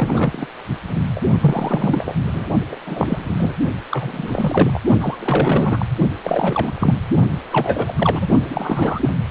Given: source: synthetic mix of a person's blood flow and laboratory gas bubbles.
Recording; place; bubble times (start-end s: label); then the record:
Doppler ultrasound of blood flow; precordium
0.00-0.47 s: bubbles
0.88-1.00 s: bubbles
1.16-1.21 s: bubbles
1.41-2.15 s: bubbles
2.26-2.47 s: bubbles
2.71-2.76 s: bubbles
2.86-3.34 s: bubbles
3.36-3.54 s: bubbles
3.90-4.81 s: bubbles
5.00-5.18 s: bubbles
5.21-5.86 s: bubbles
6.24-6.94 s: bubbles
7.50-7.93 s: bubbles
7.97-8.28 s: bubbles
8.50-9.13 s: bubbles
From the record:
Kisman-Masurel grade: 342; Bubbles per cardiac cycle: rolling drumbeat, 9 or more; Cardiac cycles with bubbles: 100%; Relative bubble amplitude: moderate (0.250 to 0.450); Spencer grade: 3 (all of the cardiac periods contain showers or single bubble signals, but not dominating or overriding the cardiac motion signals); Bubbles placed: only in the low amplitude regions of the cardiac cycle